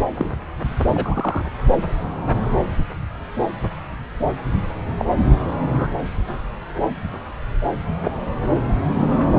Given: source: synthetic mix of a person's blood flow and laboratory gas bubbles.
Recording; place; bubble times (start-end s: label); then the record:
Doppler ultrasound of blood flow; subclavian vein
0.15-0.29 s: bubbles
0.94-1.46 s: bubbles
4.99-5.05 s: bubbles
5.75-5.88 s: bubbles
8.03-8.11 s: bubbles
From the record:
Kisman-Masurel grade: 122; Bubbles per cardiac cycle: 1 to 2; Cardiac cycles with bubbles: 10 to 50%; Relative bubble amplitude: moderate (0.250 to 0.450); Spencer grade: 2 (many but less than half of the cardiac periods contain bubble signals, singularly or in groups); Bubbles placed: anywhere in the cardiac cycle